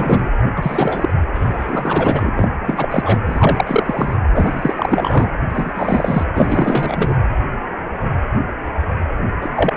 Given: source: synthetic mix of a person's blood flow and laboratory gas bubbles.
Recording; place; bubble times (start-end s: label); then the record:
Doppler ultrasound of blood flow; precordium
0.00-0.30 s: bubbles
0.55-1.12 s: bubbles
1.34-2.33 s: bubbles
2.36-2.48 s: bubbles
2.65-3.19 s: bubbles
3.25-4.14 s: bubbles
4.34-5.30 s: bubbles
5.50-6.24 s: bubbles
6.34-7.17 s: bubbles
9.41-9.49 s: bubbles
9.55-9.77 s: bubbles
From the record:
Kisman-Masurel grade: 333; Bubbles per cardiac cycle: rolling drumbeat, 9 or more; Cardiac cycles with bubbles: 50 to 99%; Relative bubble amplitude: loud (0.450 to 0.775); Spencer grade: 3 (all of the cardiac periods contain showers or single bubble signals, but not dominating or overriding the cardiac motion signals); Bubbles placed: anywhere in the cardiac cycle